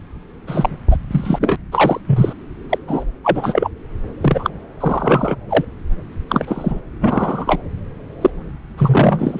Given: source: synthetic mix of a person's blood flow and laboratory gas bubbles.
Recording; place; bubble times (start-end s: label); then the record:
Doppler ultrasound of blood flow; subclavian vein
0.47-0.69 s: bubbles
0.91-0.97 s: bubbles
1.10-1.56 s: bubbles
1.72-2.00 s: bubbles
2.07-2.33 s: bubbles
2.69-2.79 s: bubbles
2.88-3.04 s: bubbles
3.24-3.68 s: bubbles
4.21-4.50 s: bubbles
4.80-5.36 s: bubbles
5.48-5.64 s: bubbles
6.29-6.79 s: bubbles
7.00-7.62 s: bubbles
8.21-8.30 s: bubbles
8.77-9.40 s: bubbles
From the record:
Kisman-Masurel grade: 243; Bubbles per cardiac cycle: several, 3 to 8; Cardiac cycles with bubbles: 100%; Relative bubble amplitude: loud (0.450 to 0.775); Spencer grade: 3 (all of the cardiac periods contain showers or single bubble signals, but not dominating or overriding the cardiac motion signals); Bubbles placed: anywhere in the cardiac cycle